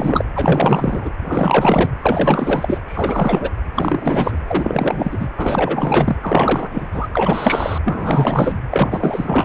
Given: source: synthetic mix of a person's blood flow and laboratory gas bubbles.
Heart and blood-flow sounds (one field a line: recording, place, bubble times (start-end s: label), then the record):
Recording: Doppler ultrasound of blood flow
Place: precordium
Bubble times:
0.00-0.24 s: bubbles
0.35-1.10 s: bubbles
1.25-1.90 s: bubbles
2.02-2.78 s: bubbles
2.86-3.51 s: bubbles
3.75-4.38 s: bubbles
4.47-5.29 s: bubbles
5.37-6.16 s: bubbles
6.21-7.08 s: bubbles
7.13-7.78 s: bubbles
7.85-8.62 s: bubbles
8.70-9.45 s: bubbles
From the record:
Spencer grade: 4 (maximum detectable bubble signal sounding continuously throughout systole and diastole of every cardiac period, and overriding the amplitude of the normal cardiac signals)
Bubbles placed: anywhere in the cardiac cycle